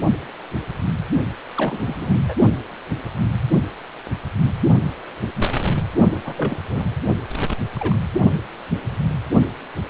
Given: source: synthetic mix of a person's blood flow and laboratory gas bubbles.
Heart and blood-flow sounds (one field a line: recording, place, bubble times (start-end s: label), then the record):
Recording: Doppler ultrasound of blood flow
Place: precordium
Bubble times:
1.54-2.21 s: bubbles
2.27-2.35 s: bubbles
6.25-6.33 s: bubbles
6.37-6.57 s: bubbles
6.68-6.96 s: bubbles
7.75-7.98 s: bubbles
From the record:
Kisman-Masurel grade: 222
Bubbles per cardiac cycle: several, 3 to 8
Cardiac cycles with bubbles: 10 to 50%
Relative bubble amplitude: moderate (0.250 to 0.450)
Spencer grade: 2 (many but less than half of the cardiac periods contain bubble signals, singularly or in groups)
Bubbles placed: only in the low amplitude regions of the cardiac cycle